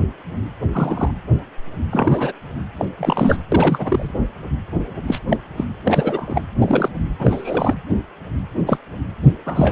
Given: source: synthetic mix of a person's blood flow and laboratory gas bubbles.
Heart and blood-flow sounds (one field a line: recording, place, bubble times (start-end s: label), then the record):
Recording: Doppler ultrasound of blood flow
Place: precordium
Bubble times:
0.72-1.11 s: bubbles
1.91-2.33 s: bubbles
2.79-2.85 s: bubbles
2.97-3.37 s: bubbles
3.52-4.11 s: bubbles
5.08-5.19 s: bubbles
5.29-5.37 s: bubbles
5.57-5.65 s: bubbles
5.86-6.42 s: bubbles
6.58-6.89 s: bubbles
7.19-7.75 s: bubbles
8.66-8.77 s: bubbles
9.23-9.32 s: bubbles
9.46-9.72 s: bubbles
From the record:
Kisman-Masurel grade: 232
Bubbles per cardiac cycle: several, 3 to 8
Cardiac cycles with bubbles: 50 to 99%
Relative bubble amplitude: moderate (0.250 to 0.450)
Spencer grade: 3 (all of the cardiac periods contain showers or single bubble signals, but not dominating or overriding the cardiac motion signals)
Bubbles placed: anywhere in the cardiac cycle